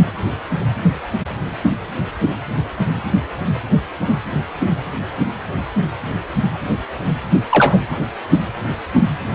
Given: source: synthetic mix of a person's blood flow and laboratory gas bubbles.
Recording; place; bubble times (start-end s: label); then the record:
Doppler ultrasound of blood flow; precordium
7.49-7.79 s: bubbles
From the record:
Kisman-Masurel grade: 213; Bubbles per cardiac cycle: several, 3 to 8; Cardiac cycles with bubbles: 1 to 10%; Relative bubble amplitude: loud (0.450 to 0.775); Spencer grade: 1 (occasional bubble signal discernible with the cardiac motion signal, with majority of cardiac periods free of bubbles); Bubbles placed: anywhere in the cardiac cycle